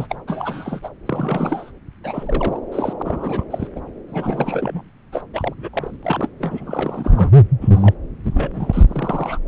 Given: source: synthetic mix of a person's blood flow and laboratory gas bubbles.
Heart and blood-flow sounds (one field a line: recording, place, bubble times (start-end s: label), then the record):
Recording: Doppler ultrasound of blood flow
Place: subclavian vein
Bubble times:
0.00-0.15 s: bubbles
0.27-0.80 s: bubbles
0.82-0.90 s: bubbles
1.05-1.72 s: bubbles
2.04-2.60 s: bubbles
2.72-2.93 s: bubbles
2.99-3.44 s: bubbles
3.50-3.67 s: bubbles
3.75-3.80 s: bubbles
4.09-4.82 s: bubbles
5.12-5.24 s: bubbles
5.33-5.54 s: bubbles
5.58-5.69 s: bubbles
5.73-5.96 s: bubbles
6.03-6.29 s: bubbles
6.40-7.31 s: bubbles
7.61-7.94 s: bubbles
8.23-8.85 s: bubbles
8.87-9.39 s: bubbles
From the record:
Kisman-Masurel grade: 342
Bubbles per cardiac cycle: rolling drumbeat, 9 or more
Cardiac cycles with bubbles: 100%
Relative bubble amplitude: moderate (0.250 to 0.450)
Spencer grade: 3 (all of the cardiac periods contain showers or single bubble signals, but not dominating or overriding the cardiac motion signals)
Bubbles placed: anywhere in the cardiac cycle